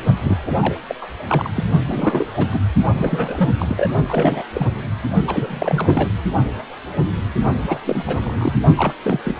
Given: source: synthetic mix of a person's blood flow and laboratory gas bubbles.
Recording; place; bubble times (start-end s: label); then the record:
Doppler ultrasound of blood flow; precordium
0.21-0.37 s: bubbles
0.42-0.55 s: bubbles
0.60-0.77 s: bubbles
0.89-0.95 s: bubbles
1.01-1.07 s: bubbles
1.28-1.49 s: bubbles
1.54-1.65 s: bubbles
1.86-2.27 s: bubbles
2.33-2.46 s: bubbles
2.52-2.60 s: bubbles
2.98-3.50 s: bubbles
3.58-3.90 s: bubbles
4.08-4.42 s: bubbles
4.53-4.71 s: bubbles
5.27-6.08 s: bubbles
7.61-7.78 s: bubbles
7.85-8.56 s: bubbles
8.75-8.93 s: bubbles
9.02-9.20 s: bubbles
9.25-9.39 s: bubbles
From the record:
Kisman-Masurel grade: 332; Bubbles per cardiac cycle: rolling drumbeat, 9 or more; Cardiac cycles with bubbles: 50 to 99%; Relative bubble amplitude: moderate (0.250 to 0.450); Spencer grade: 3 (all of the cardiac periods contain showers or single bubble signals, but not dominating or overriding the cardiac motion signals); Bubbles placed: only in the low amplitude regions of the cardiac cycle